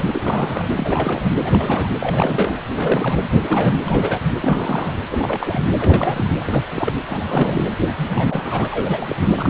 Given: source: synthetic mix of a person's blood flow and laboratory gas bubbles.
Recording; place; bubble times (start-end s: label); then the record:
Doppler ultrasound of blood flow; precordium
0.00-0.05 s: bubbles
0.12-0.69 s: bubbles
0.77-1.29 s: bubbles
1.44-1.89 s: bubbles
2.00-2.57 s: bubbles
2.75-3.20 s: bubbles
3.30-3.77 s: bubbles
3.84-4.21 s: bubbles
4.41-4.94 s: bubbles
5.11-5.59 s: bubbles
5.62-5.71 s: bubbles
5.76-6.31 s: bubbles
6.40-6.62 s: bubbles
6.71-6.92 s: bubbles
7.09-7.64 s: bubbles
7.87-9.15 s: bubbles
9.19-9.29 s: bubbles
9.35-9.50 s: bubbles
From the record:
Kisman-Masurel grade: 342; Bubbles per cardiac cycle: rolling drumbeat, 9 or more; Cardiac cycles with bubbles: 100%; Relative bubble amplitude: moderate (0.250 to 0.450); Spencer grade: 3 (all of the cardiac periods contain showers or single bubble signals, but not dominating or overriding the cardiac motion signals); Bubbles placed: anywhere in the cardiac cycle